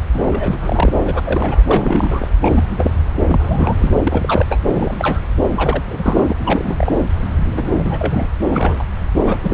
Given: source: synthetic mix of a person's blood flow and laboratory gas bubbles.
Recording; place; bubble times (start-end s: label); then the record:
Doppler ultrasound of blood flow; subclavian vein
0.13-0.23 s: bubbles
0.26-0.93 s: bubbles
1.05-1.63 s: bubbles
1.68-2.28 s: bubbles
2.41-2.65 s: bubbles
2.69-2.90 s: bubbles
3.18-3.92 s: bubbles
4.04-4.46 s: bubbles
4.49-4.59 s: bubbles
4.70-5.20 s: bubbles
5.54-5.84 s: bubbles
5.89-6.33 s: bubbles
6.38-6.94 s: bubbles
7.43-7.70 s: bubbles
7.73-8.27 s: bubbles
8.52-8.85 s: bubbles
9.26-9.38 s: bubbles
9.42-9.53 s: bubbles
From the record:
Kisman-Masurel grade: 342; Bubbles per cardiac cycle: rolling drumbeat, 9 or more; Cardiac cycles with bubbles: 100%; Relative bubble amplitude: moderate (0.250 to 0.450); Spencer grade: 3 (all of the cardiac periods contain showers or single bubble signals, but not dominating or overriding the cardiac motion signals); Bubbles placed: anywhere in the cardiac cycle